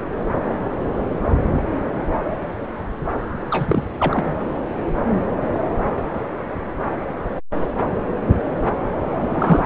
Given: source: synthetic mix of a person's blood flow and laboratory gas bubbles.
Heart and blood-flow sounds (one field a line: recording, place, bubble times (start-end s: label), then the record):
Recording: Doppler ultrasound of blood flow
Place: subclavian vein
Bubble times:
3.51-3.84 s: bubbles
3.98-4.35 s: bubbles
9.21-9.66 s: bubbles
From the record:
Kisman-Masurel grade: 223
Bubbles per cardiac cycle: several, 3 to 8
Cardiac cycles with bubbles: 10 to 50%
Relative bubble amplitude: loud (0.450 to 0.775)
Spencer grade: 2 (many but less than half of the cardiac periods contain bubble signals, singularly or in groups)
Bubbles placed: anywhere in the cardiac cycle